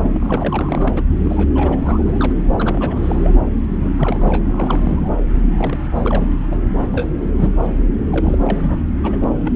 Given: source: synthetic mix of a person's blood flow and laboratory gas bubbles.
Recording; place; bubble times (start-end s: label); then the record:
Doppler ultrasound of blood flow; subclavian vein
0.03-1.02 s: bubbles
1.24-1.76 s: bubbles
1.80-2.32 s: bubbles
2.57-3.35 s: bubbles
3.81-3.90 s: bubbles
3.97-5.10 s: bubbles
5.57-5.78 s: bubbles
5.94-6.25 s: bubbles
6.51-6.55 s: bubbles
6.79-7.08 s: bubbles
7.20-7.56 s: bubbles
7.66-7.74 s: bubbles
8.11-8.38 s: bubbles
8.43-8.82 s: bubbles
9.03-9.17 s: bubbles
9.22-9.28 s: bubbles
9.45-9.53 s: bubbles
From the record:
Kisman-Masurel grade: 342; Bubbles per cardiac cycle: rolling drumbeat, 9 or more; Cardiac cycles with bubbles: 100%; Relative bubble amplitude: moderate (0.250 to 0.450); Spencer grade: 3 (all of the cardiac periods contain showers or single bubble signals, but not dominating or overriding the cardiac motion signals); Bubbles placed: anywhere in the cardiac cycle